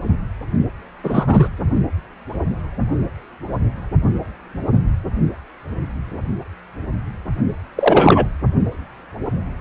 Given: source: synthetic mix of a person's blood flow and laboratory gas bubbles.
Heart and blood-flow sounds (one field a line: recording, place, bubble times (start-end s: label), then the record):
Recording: Doppler ultrasound of blood flow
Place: precordium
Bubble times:
1.04-1.48 s: bubbles
7.75-8.27 s: bubbles
From the record:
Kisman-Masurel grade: 223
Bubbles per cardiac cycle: several, 3 to 8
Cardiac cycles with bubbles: 10 to 50%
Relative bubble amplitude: loud (0.450 to 0.775)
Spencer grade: 2 (many but less than half of the cardiac periods contain bubble signals, singularly or in groups)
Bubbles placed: only in the low amplitude regions of the cardiac cycle